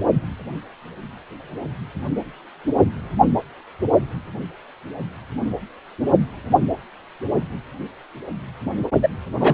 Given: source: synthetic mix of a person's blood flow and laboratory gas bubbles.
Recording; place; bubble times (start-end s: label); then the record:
Doppler ultrasound of blood flow; precordium
9.03-9.09 s: bubbles
9.40-9.54 s: bubbles
From the record:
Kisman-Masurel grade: 213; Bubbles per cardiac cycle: several, 3 to 8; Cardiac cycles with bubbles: 1 to 10%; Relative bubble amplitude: loud (0.450 to 0.775); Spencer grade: 1 (occasional bubble signal discernible with the cardiac motion signal, with majority of cardiac periods free of bubbles); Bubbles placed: only in the low amplitude regions of the cardiac cycle